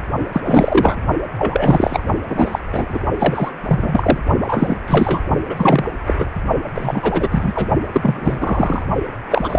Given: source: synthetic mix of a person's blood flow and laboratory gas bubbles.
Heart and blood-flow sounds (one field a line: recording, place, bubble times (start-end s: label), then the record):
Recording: Doppler ultrasound of blood flow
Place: precordium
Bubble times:
0.32-0.41 s: bubbles
0.44-0.99 s: bubbles
1.38-2.04 s: bubbles
2.28-2.60 s: bubbles
2.72-2.86 s: bubbles
2.89-2.99 s: bubbles
3.19-3.52 s: bubbles
3.68-4.20 s: bubbles
4.41-4.77 s: bubbles
4.88-5.20 s: bubbles
5.49-5.84 s: bubbles
6.06-6.13 s: bubbles
6.18-6.28 s: bubbles
6.74-7.67 s: bubbles
7.93-8.85 s: bubbles
9.30-9.59 s: bubbles
From the record:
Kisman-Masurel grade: 333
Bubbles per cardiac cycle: rolling drumbeat, 9 or more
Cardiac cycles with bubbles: 50 to 99%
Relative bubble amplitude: loud (0.450 to 0.775)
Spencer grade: 3 (all of the cardiac periods contain showers or single bubble signals, but not dominating or overriding the cardiac motion signals)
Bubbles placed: only in the low amplitude regions of the cardiac cycle